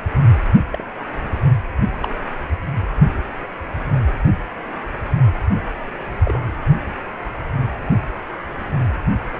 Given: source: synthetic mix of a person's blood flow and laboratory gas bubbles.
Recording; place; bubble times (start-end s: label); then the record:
Doppler ultrasound of blood flow; precordium
0.72-0.84 s: bubbles
2.00-2.08 s: bubbles
6.24-6.40 s: bubbles
From the record:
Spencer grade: 2 (many but less than half of the cardiac periods contain bubble signals, singularly or in groups); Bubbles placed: only in the low amplitude regions of the cardiac cycle